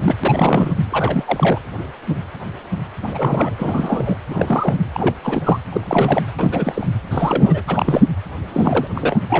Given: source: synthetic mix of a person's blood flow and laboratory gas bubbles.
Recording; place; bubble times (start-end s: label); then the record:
Doppler ultrasound of blood flow; precordium
0.00-0.15 s: bubbles
0.23-0.73 s: bubbles
0.92-1.59 s: bubbles
3.02-4.17 s: bubbles
4.30-4.79 s: bubbles
4.94-5.14 s: bubbles
5.22-5.59 s: bubbles
5.72-6.22 s: bubbles
6.38-6.87 s: bubbles
7.11-7.61 s: bubbles
7.67-8.06 s: bubbles
8.53-8.88 s: bubbles
8.95-9.18 s: bubbles
9.29-9.40 s: bubbles
From the record:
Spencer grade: 3 (all of the cardiac periods contain showers or single bubble signals, but not dominating or overriding the cardiac motion signals); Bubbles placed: anywhere in the cardiac cycle